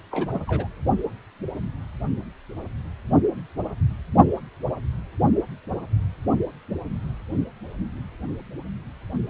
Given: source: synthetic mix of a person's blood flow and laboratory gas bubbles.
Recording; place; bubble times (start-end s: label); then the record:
Doppler ultrasound of blood flow; precordium
0.11-0.42 s: bubbles
0.47-0.68 s: bubbles
From the record:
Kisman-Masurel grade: 211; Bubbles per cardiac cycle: several, 3 to 8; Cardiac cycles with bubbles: 1 to 10%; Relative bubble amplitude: barely perceptible (0.100 to 0.250); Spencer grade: 1 (occasional bubble signal discernible with the cardiac motion signal, with majority of cardiac periods free of bubbles); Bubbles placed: only in the low amplitude regions of the cardiac cycle